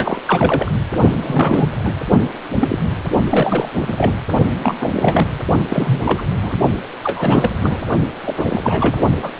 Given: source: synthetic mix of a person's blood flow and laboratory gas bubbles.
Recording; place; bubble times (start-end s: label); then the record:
Doppler ultrasound of blood flow; precordium
0.00-0.20 s: bubbles
0.27-0.71 s: bubbles
1.12-1.70 s: bubbles
1.84-1.94 s: bubbles
2.07-2.19 s: bubbles
2.60-2.78 s: bubbles
3.28-4.14 s: bubbles
4.62-4.76 s: bubbles
4.79-4.91 s: bubbles
4.95-5.26 s: bubbles
5.69-6.01 s: bubbles
6.05-6.25 s: bubbles
6.42-6.57 s: bubbles
7.03-7.52 s: bubbles
7.62-7.83 s: bubbles
8.26-9.02 s: bubbles
9.21-9.30 s: bubbles
From the record:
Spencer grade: 3 (all of the cardiac periods contain showers or single bubble signals, but not dominating or overriding the cardiac motion signals); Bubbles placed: only in the low amplitude regions of the cardiac cycle